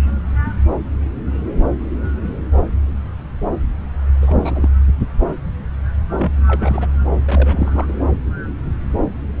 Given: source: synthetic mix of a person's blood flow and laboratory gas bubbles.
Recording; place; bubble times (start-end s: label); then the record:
Doppler ultrasound of blood flow; subclavian vein
4.22-4.70 s: bubbles
6.17-6.33 s: bubbles
6.47-6.89 s: bubbles
7.26-7.86 s: bubbles
7.89-7.93 s: bubbles
From the record:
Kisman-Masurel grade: 221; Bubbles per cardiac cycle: several, 3 to 8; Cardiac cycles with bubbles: 10 to 50%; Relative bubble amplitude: barely perceptible (0.100 to 0.250); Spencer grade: 2 (many but less than half of the cardiac periods contain bubble signals, singularly or in groups); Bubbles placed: anywhere in the cardiac cycle